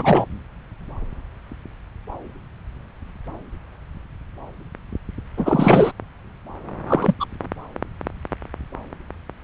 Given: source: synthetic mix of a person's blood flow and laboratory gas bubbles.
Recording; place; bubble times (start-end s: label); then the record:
Doppler ultrasound of blood flow; subclavian vein
0.00-0.28 s: bubbles
5.37-5.92 s: bubbles
6.87-7.14 s: bubbles
7.20-7.26 s: bubbles
From the record:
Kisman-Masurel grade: 223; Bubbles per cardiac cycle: several, 3 to 8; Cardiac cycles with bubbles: 10 to 50%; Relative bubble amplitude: loud (0.450 to 0.775); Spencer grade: 2 (many but less than half of the cardiac periods contain bubble signals, singularly or in groups); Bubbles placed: anywhere in the cardiac cycle